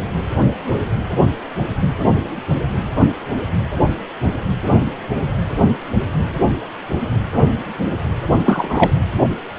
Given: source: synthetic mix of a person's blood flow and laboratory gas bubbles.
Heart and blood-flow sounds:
Doppler ultrasound of blood flow; precordium
8.46-8.91 s: bubbles
From the record:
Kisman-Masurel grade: 213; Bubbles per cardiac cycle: several, 3 to 8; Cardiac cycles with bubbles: 1 to 10%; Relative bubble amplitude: loud (0.450 to 0.775); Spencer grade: 1 (occasional bubble signal discernible with the cardiac motion signal, with majority of cardiac periods free of bubbles); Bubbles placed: anywhere in the cardiac cycle

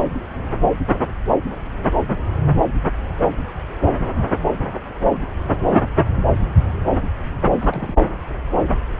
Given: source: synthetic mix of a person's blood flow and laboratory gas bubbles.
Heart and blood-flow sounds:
Doppler ultrasound of blood flow; subclavian vein
7.56-7.97 s: bubbles
From the record:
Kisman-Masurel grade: 111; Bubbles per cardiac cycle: 1 to 2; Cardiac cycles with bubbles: 1 to 10%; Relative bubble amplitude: barely perceptible (0.100 to 0.250); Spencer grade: 1 (occasional bubble signal discernible with the cardiac motion signal, with majority of cardiac periods free of bubbles); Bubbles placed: anywhere in the cardiac cycle

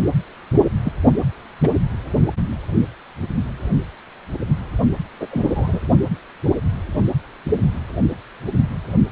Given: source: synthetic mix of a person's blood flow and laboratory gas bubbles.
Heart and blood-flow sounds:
Doppler ultrasound of blood flow; precordium
0.85-0.92 s: bubbles
1.63-1.69 s: bubbles
5.20-5.27 s: bubbles
5.31-5.80 s: bubbles
From the record:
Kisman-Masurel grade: 122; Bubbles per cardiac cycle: 1 to 2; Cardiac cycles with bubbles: 10 to 50%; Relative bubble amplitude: moderate (0.250 to 0.450); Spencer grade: 2 (many but less than half of the cardiac periods contain bubble signals, singularly or in groups); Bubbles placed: only in the low amplitude regions of the cardiac cycle

